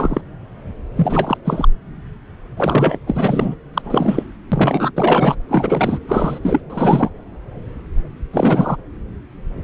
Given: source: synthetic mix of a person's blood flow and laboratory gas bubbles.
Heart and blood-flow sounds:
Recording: Doppler ultrasound of blood flow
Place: subclavian vein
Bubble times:
0.00-0.21 s: bubbles
0.96-1.38 s: bubbles
1.44-1.68 s: bubbles
2.56-2.98 s: bubbles
3.06-3.56 s: bubbles
3.74-4.25 s: bubbles
4.52-4.92 s: bubbles
4.96-5.36 s: bubbles
5.48-5.99 s: bubbles
6.08-6.39 s: bubbles
6.43-6.61 s: bubbles
6.70-7.09 s: bubbles
8.32-8.77 s: bubbles
From the record:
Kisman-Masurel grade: 333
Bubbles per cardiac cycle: rolling drumbeat, 9 or more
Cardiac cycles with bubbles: 50 to 99%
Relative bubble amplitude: loud (0.450 to 0.775)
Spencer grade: 3 (all of the cardiac periods contain showers or single bubble signals, but not dominating or overriding the cardiac motion signals)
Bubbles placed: anywhere in the cardiac cycle

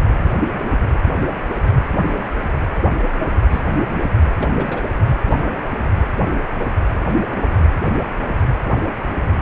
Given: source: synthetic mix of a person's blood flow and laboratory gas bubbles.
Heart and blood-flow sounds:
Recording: Doppler ultrasound of blood flow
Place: precordium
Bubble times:
3.51-3.62 s: bubbles
4.41-4.46 s: bubbles
4.59-4.81 s: bubbles
From the record:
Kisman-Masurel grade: 122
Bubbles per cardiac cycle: 1 to 2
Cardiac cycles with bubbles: 10 to 50%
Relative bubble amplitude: moderate (0.250 to 0.450)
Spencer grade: 2 (many but less than half of the cardiac periods contain bubble signals, singularly or in groups)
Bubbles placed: anywhere in the cardiac cycle

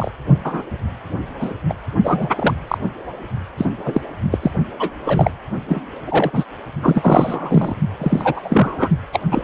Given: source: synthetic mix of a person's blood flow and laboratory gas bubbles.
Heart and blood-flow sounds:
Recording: Doppler ultrasound of blood flow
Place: precordium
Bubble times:
0.00-0.10 s: bubbles
0.44-0.62 s: bubbles
1.40-1.54 s: bubbles
1.69-1.74 s: bubbles
2.04-2.28 s: bubbles
2.35-2.53 s: bubbles
2.68-2.78 s: bubbles
3.57-3.71 s: bubbles
3.85-4.01 s: bubbles
4.32-4.38 s: bubbles
4.42-4.51 s: bubbles
4.79-4.91 s: bubbles
5.04-5.31 s: bubbles
5.68-5.82 s: bubbles
6.06-6.45 s: bubbles
6.82-7.75 s: bubbles
7.99-8.89 s: bubbles
9.12-9.20 s: bubbles
9.30-9.43 s: bubbles
From the record:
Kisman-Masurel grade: 243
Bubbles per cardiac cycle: several, 3 to 8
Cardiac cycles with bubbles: 100%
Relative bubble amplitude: loud (0.450 to 0.775)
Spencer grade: 3 (all of the cardiac periods contain showers or single bubble signals, but not dominating or overriding the cardiac motion signals)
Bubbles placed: only in the low amplitude regions of the cardiac cycle

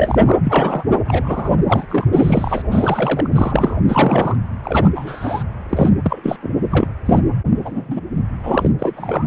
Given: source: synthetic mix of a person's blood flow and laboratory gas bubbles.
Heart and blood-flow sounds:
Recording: Doppler ultrasound of blood flow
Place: precordium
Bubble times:
0.00-0.21 s: bubbles
0.25-0.37 s: bubbles
0.44-0.84 s: bubbles
1.04-1.50 s: bubbles
1.67-1.86 s: bubbles
1.89-2.05 s: bubbles
2.12-2.62 s: bubbles
2.71-3.27 s: bubbles
3.29-3.80 s: bubbles
3.87-4.36 s: bubbles
4.63-4.91 s: bubbles
4.95-5.43 s: bubbles
5.69-5.90 s: bubbles
6.04-6.37 s: bubbles
6.42-6.52 s: bubbles
6.70-6.86 s: bubbles
7.05-7.19 s: bubbles
7.54-8.00 s: bubbles
8.42-8.71 s: bubbles
8.79-9.26 s: bubbles
From the record:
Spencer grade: 3 (all of the cardiac periods contain showers or single bubble signals, but not dominating or overriding the cardiac motion signals)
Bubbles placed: anywhere in the cardiac cycle

